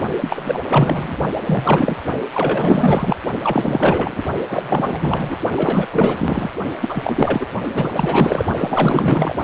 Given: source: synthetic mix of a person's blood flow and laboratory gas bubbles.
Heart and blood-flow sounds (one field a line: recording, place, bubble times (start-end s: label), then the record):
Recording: Doppler ultrasound of blood flow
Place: precordium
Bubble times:
0.21-0.62 s: bubbles
0.69-1.16 s: bubbles
1.46-2.01 s: bubbles
2.34-3.16 s: bubbles
3.43-4.23 s: bubbles
4.48-5.37 s: bubbles
5.55-5.88 s: bubbles
5.92-6.51 s: bubbles
6.80-7.46 s: bubbles
7.74-8.45 s: bubbles
8.59-9.35 s: bubbles
From the record:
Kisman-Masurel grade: 444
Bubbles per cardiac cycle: continuous sound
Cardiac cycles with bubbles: 100%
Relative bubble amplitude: maximal (0.775 to 0.999)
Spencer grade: 4 (maximum detectable bubble signal sounding continuously throughout systole and diastole of every cardiac period, and overriding the amplitude of the normal cardiac signals)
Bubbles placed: only in the low amplitude regions of the cardiac cycle